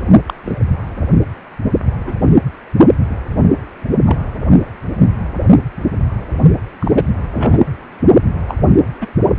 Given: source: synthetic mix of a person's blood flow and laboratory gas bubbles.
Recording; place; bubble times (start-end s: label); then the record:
Doppler ultrasound of blood flow; precordium
0.27-0.34 s: bubbles
0.45-0.60 s: bubbles
2.04-2.15 s: bubbles
4.05-4.17 s: bubbles
6.80-6.92 s: bubbles
6.94-7.04 s: bubbles
7.33-7.59 s: bubbles
8.48-8.55 s: bubbles
9.01-9.07 s: bubbles
From the record:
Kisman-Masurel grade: 123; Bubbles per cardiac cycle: 1 to 2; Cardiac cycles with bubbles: 10 to 50%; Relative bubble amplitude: loud (0.450 to 0.775); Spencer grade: 2 (many but less than half of the cardiac periods contain bubble signals, singularly or in groups); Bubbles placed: anywhere in the cardiac cycle